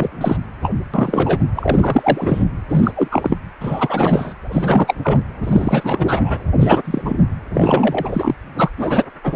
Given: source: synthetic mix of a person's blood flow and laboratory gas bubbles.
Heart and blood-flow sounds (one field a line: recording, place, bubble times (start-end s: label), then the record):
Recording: Doppler ultrasound of blood flow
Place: precordium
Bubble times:
0.00-0.36 s: bubbles
0.62-0.72 s: bubbles
0.94-1.39 s: bubbles
1.55-2.44 s: bubbles
2.68-2.92 s: bubbles
2.96-3.08 s: bubbles
3.11-3.38 s: bubbles
3.60-4.34 s: bubbles
4.51-4.95 s: bubbles
5.02-5.22 s: bubbles
5.43-6.38 s: bubbles
6.60-7.18 s: bubbles
7.54-8.35 s: bubbles
8.54-8.70 s: bubbles
8.77-9.04 s: bubbles
9.23-9.36 s: bubbles
From the record:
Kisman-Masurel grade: 343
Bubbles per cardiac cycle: rolling drumbeat, 9 or more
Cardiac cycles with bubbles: 100%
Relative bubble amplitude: loud (0.450 to 0.775)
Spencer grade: 3 (all of the cardiac periods contain showers or single bubble signals, but not dominating or overriding the cardiac motion signals)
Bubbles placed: anywhere in the cardiac cycle